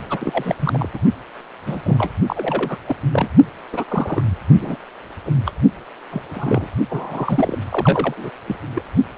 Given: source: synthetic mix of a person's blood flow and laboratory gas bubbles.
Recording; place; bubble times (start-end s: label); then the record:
Doppler ultrasound of blood flow; precordium
0.09-0.55 s: bubbles
0.60-0.88 s: bubbles
0.93-1.00 s: bubbles
1.66-2.12 s: bubbles
2.26-2.77 s: bubbles
2.86-2.96 s: bubbles
3.12-3.28 s: bubbles
3.73-3.84 s: bubbles
3.88-4.23 s: bubbles
4.61-4.77 s: bubbles
5.25-5.33 s: bubbles
5.46-5.53 s: bubbles
6.11-6.23 s: bubbles
6.29-6.68 s: bubbles
6.89-7.59 s: bubbles
7.70-8.30 s: bubbles
8.47-8.56 s: bubbles
8.75-8.82 s: bubbles
From the record:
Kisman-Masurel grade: 242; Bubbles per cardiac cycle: several, 3 to 8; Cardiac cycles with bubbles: 100%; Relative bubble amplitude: moderate (0.250 to 0.450); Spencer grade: 3 (all of the cardiac periods contain showers or single bubble signals, but not dominating or overriding the cardiac motion signals); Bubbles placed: only in the low amplitude regions of the cardiac cycle